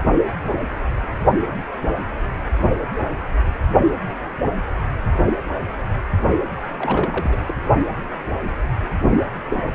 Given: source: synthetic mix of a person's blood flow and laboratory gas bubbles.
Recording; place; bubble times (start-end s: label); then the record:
Doppler ultrasound of blood flow; precordium
6.74-7.38 s: bubbles
7.47-7.54 s: bubbles
From the record:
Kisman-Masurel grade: 212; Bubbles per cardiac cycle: several, 3 to 8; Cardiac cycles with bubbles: 1 to 10%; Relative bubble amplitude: moderate (0.250 to 0.450); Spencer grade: 1 (occasional bubble signal discernible with the cardiac motion signal, with majority of cardiac periods free of bubbles); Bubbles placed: only in the low amplitude regions of the cardiac cycle